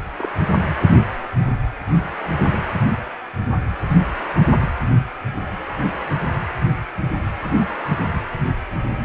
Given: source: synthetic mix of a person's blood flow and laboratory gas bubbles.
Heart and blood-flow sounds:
Doppler ultrasound of blood flow; precordium
0.00-0.03 s: bubbles
0.18-0.32 s: bubbles
From the record:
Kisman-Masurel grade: 111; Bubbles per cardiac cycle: 1 to 2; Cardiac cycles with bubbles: 1 to 10%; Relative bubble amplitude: barely perceptible (0.100 to 0.250); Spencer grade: 1 (occasional bubble signal discernible with the cardiac motion signal, with majority of cardiac periods free of bubbles); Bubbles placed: anywhere in the cardiac cycle

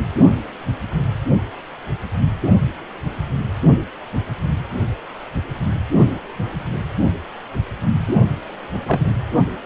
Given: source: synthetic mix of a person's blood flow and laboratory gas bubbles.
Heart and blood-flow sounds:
Doppler ultrasound of blood flow; precordium
8.07-8.15 s: bubbles
8.87-9.00 s: bubbles
From the record:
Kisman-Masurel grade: 112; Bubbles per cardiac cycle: 1 to 2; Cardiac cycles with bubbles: 1 to 10%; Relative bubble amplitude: moderate (0.250 to 0.450); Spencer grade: 1 (occasional bubble signal discernible with the cardiac motion signal, with majority of cardiac periods free of bubbles); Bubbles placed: anywhere in the cardiac cycle

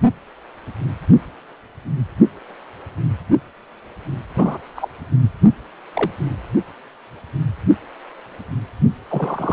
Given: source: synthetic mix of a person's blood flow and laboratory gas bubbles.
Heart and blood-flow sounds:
Doppler ultrasound of blood flow; precordium
4.36-4.58 s: bubbles
4.75-4.88 s: bubbles
5.94-6.11 s: bubbles
9.10-9.53 s: bubbles
From the record:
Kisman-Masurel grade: 122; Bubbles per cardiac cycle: 1 to 2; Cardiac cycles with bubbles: 10 to 50%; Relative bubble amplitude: moderate (0.250 to 0.450); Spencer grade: 2 (many but less than half of the cardiac periods contain bubble signals, singularly or in groups); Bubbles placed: only in the low amplitude regions of the cardiac cycle

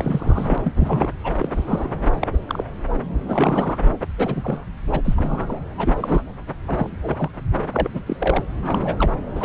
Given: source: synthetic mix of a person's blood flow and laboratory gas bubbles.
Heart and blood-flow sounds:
Doppler ultrasound of blood flow; subclavian vein
0.00-0.58 s: bubbles
0.64-0.73 s: bubbles
0.76-1.10 s: bubbles
1.24-1.32 s: bubbles
1.35-1.88 s: bubbles
2.21-2.28 s: bubbles
2.33-2.38 s: bubbles
2.49-2.63 s: bubbles
3.28-3.78 s: bubbles
4.01-4.07 s: bubbles
4.18-4.66 s: bubbles
4.91-5.02 s: bubbles
5.04-5.60 s: bubbles
5.78-6.34 s: bubbles
6.67-7.30 s: bubbles
7.73-7.90 s: bubbles
7.94-8.17 s: bubbles
8.20-8.43 s: bubbles
8.62-9.11 s: bubbles
9.35-9.45 s: bubbles
From the record:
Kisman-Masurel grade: 242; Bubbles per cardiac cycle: several, 3 to 8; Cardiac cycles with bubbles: 100%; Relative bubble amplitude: moderate (0.250 to 0.450); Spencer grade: 3 (all of the cardiac periods contain showers or single bubble signals, but not dominating or overriding the cardiac motion signals); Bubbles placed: anywhere in the cardiac cycle

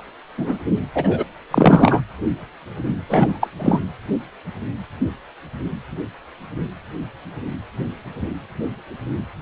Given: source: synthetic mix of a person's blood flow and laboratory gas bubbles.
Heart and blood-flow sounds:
Doppler ultrasound of blood flow; precordium
0.38-0.58 s: bubbles
0.94-1.23 s: bubbles
1.50-2.01 s: bubbles
3.08-3.48 s: bubbles
3.59-3.81 s: bubbles
From the record:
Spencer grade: 2 (many but less than half of the cardiac periods contain bubble signals, singularly or in groups); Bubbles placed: anywhere in the cardiac cycle

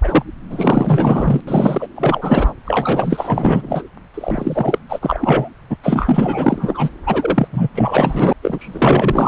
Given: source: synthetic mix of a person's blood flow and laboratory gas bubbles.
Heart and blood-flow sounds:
Doppler ultrasound of blood flow; subclavian vein
0.04-0.23 s: bubbles
0.49-1.41 s: bubbles
1.47-1.88 s: bubbles
1.96-2.53 s: bubbles
2.65-3.82 s: bubbles
4.14-4.79 s: bubbles
4.89-5.50 s: bubbles
5.70-5.76 s: bubbles
5.83-6.89 s: bubbles
7.07-7.48 s: bubbles
7.53-7.68 s: bubbles
7.74-8.33 s: bubbles
8.43-9.28 s: bubbles
From the record:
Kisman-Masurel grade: 444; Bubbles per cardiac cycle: continuous sound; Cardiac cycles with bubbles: 100%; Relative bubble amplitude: maximal (0.775 to 0.999); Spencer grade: 4 (maximum detectable bubble signal sounding continuously throughout systole and diastole of every cardiac period, and overriding the amplitude of the normal cardiac signals); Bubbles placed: anywhere in the cardiac cycle

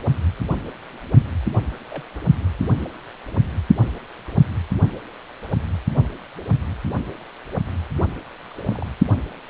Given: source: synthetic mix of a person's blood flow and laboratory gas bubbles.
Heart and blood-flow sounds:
Doppler ultrasound of blood flow; precordium
1.73-1.76 s: bubbles
1.89-2.08 s: bubbles
8.48-8.86 s: bubbles
From the record:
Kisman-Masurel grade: 121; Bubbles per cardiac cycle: 1 to 2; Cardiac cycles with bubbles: 10 to 50%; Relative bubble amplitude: barely perceptible (0.100 to 0.250); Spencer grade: 2 (many but less than half of the cardiac periods contain bubble signals, singularly or in groups); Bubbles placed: only in the low amplitude regions of the cardiac cycle

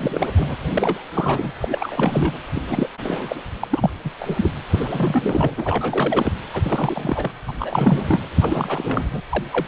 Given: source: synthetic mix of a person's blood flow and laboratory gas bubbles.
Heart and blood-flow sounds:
Doppler ultrasound of blood flow; precordium
0.00-0.29 s: bubbles
0.37-0.56 s: bubbles
0.69-1.03 s: bubbles
1.14-1.51 s: bubbles
1.60-2.38 s: bubbles
2.54-2.62 s: bubbles
2.69-2.90 s: bubbles
3.04-3.44 s: bubbles
3.61-3.90 s: bubbles
4.04-4.09 s: bubbles
4.19-4.50 s: bubbles
4.70-5.54 s: bubbles
5.58-6.33 s: bubbles
6.54-7.31 s: bubbles
7.47-7.52 s: bubbles
7.59-8.19 s: bubbles
8.41-9.03 s: bubbles
9.11-9.21 s: bubbles
9.30-9.44 s: bubbles
9.52-9.67 s: bubbles
From the record:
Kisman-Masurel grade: 342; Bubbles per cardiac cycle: rolling drumbeat, 9 or more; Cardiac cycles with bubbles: 100%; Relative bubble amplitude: moderate (0.250 to 0.450); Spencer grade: 3 (all of the cardiac periods contain showers or single bubble signals, but not dominating or overriding the cardiac motion signals); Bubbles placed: anywhere in the cardiac cycle

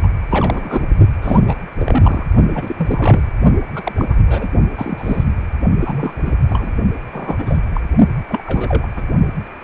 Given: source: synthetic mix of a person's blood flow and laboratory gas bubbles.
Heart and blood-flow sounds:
Doppler ultrasound of blood flow; precordium
0.03-0.08 s: bubbles
0.30-0.88 s: bubbles
1.21-1.41 s: bubbles
1.47-1.56 s: bubbles
1.78-2.26 s: bubbles
2.53-3.21 s: bubbles
3.75-3.92 s: bubbles
3.95-4.15 s: bubbles
4.27-4.48 s: bubbles
4.77-5.24 s: bubbles
5.79-6.33 s: bubbles
6.49-6.72 s: bubbles
7.12-7.58 s: bubbles
7.74-7.81 s: bubbles
8.29-8.43 s: bubbles
8.46-8.87 s: bubbles
8.96-9.03 s: bubbles
9.61-9.64 s: bubbles
From the record:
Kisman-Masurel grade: 242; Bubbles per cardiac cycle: several, 3 to 8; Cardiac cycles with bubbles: 100%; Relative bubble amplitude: moderate (0.250 to 0.450); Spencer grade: 3 (all of the cardiac periods contain showers or single bubble signals, but not dominating or overriding the cardiac motion signals); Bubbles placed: only in the low amplitude regions of the cardiac cycle

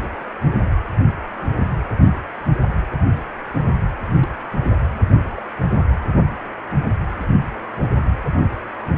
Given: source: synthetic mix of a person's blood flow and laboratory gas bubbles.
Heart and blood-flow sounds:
Doppler ultrasound of blood flow; precordium
0.46-0.52 s: bubbles
4.20-4.29 s: bubbles
5.37-5.42 s: bubbles
From the record:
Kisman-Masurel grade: 121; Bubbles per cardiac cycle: 1 to 2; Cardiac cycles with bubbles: 10 to 50%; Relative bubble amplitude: barely perceptible (0.100 to 0.250); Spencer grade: 2 (many but less than half of the cardiac periods contain bubble signals, singularly or in groups); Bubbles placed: only in the low amplitude regions of the cardiac cycle

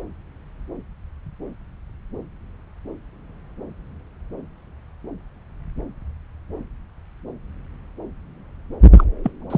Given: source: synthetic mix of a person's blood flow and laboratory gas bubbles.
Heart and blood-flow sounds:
Doppler ultrasound of blood flow; subclavian vein
8.92-9.04 s: bubbles
9.23-9.31 s: bubbles
9.50-9.58 s: bubbles
From the record:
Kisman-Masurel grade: 213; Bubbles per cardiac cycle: several, 3 to 8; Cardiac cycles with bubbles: 1 to 10%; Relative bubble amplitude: loud (0.450 to 0.775); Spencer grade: 1 (occasional bubble signal discernible with the cardiac motion signal, with majority of cardiac periods free of bubbles); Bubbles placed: anywhere in the cardiac cycle

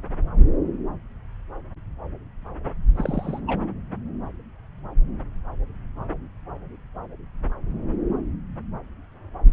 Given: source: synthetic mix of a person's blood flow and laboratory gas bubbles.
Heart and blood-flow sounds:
Doppler ultrasound of blood flow; subclavian vein
2.96-3.40 s: bubbles
3.47-3.61 s: bubbles
From the record:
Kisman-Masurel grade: 211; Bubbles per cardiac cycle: several, 3 to 8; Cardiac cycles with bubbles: 1 to 10%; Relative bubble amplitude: barely perceptible (0.100 to 0.250); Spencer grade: 1 (occasional bubble signal discernible with the cardiac motion signal, with majority of cardiac periods free of bubbles); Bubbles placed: anywhere in the cardiac cycle

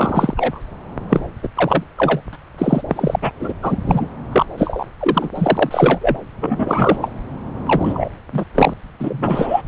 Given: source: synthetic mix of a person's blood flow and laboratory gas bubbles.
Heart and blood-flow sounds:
Doppler ultrasound of blood flow; subclavian vein
0.00-0.34 s: bubbles
0.36-0.59 s: bubbles
1.09-1.26 s: bubbles
1.43-1.48 s: bubbles
1.55-1.84 s: bubbles
1.97-2.21 s: bubbles
2.33-2.38 s: bubbles
2.58-2.82 s: bubbles
2.88-3.16 s: bubbles
3.21-3.30 s: bubbles
3.39-3.53 s: bubbles
3.62-3.76 s: bubbles
3.86-4.08 s: bubbles
4.32-4.46 s: bubbles
4.58-4.84 s: bubbles
5.00-5.29 s: bubbles
5.35-6.17 s: bubbles
6.40-7.12 s: bubbles
7.65-8.08 s: bubbles
8.32-8.44 s: bubbles
8.54-8.73 s: bubbles
9.00-9.62 s: bubbles
From the record:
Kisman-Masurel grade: 243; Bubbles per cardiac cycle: several, 3 to 8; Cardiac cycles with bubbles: 100%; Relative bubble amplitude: loud (0.450 to 0.775); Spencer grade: 3 (all of the cardiac periods contain showers or single bubble signals, but not dominating or overriding the cardiac motion signals); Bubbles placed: anywhere in the cardiac cycle

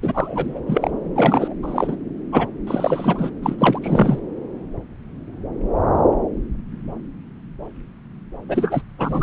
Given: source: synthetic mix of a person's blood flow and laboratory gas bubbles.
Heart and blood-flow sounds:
Doppler ultrasound of blood flow; subclavian vein
0.02-0.60 s: bubbles
0.67-0.90 s: bubbles
1.15-1.54 s: bubbles
1.62-1.96 s: bubbles
2.32-2.47 s: bubbles
2.67-3.31 s: bubbles
3.42-3.56 s: bubbles
3.58-3.78 s: bubbles
3.81-4.19 s: bubbles
8.48-8.82 s: bubbles
8.98-9.23 s: bubbles
From the record:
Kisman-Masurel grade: 333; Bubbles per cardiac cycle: rolling drumbeat, 9 or more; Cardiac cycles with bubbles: 50 to 99%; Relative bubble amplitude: loud (0.450 to 0.775); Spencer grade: 3 (all of the cardiac periods contain showers or single bubble signals, but not dominating or overriding the cardiac motion signals); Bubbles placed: anywhere in the cardiac cycle

